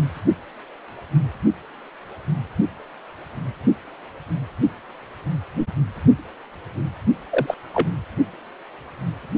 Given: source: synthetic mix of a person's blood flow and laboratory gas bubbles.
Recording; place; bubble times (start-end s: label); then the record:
Doppler ultrasound of blood flow; precordium
7.30-7.54 s: bubbles
7.74-7.89 s: bubbles
From the record:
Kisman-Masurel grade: 212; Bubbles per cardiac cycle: several, 3 to 8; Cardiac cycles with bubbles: 1 to 10%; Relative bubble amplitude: moderate (0.250 to 0.450); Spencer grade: 1 (occasional bubble signal discernible with the cardiac motion signal, with majority of cardiac periods free of bubbles); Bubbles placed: anywhere in the cardiac cycle